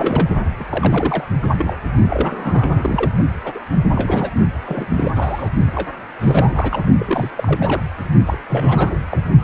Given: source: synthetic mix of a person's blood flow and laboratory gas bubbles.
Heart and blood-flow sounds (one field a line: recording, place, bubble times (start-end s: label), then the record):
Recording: Doppler ultrasound of blood flow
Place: precordium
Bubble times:
0.00-0.28 s: bubbles
0.59-0.66 s: bubbles
0.71-1.24 s: bubbles
1.42-1.48 s: bubbles
1.57-1.82 s: bubbles
2.08-3.10 s: bubbles
3.45-3.60 s: bubbles
3.89-4.31 s: bubbles
4.65-5.11 s: bubbles
5.14-5.50 s: bubbles
5.75-5.89 s: bubbles
6.19-6.83 s: bubbles
6.98-7.30 s: bubbles
7.37-7.82 s: bubbles
8.26-8.38 s: bubbles
8.48-8.96 s: bubbles
9.09-9.19 s: bubbles
From the record:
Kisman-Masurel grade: 332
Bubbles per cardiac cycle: rolling drumbeat, 9 or more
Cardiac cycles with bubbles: 50 to 99%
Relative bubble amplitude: moderate (0.250 to 0.450)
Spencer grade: 3 (all of the cardiac periods contain showers or single bubble signals, but not dominating or overriding the cardiac motion signals)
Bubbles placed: only in the low amplitude regions of the cardiac cycle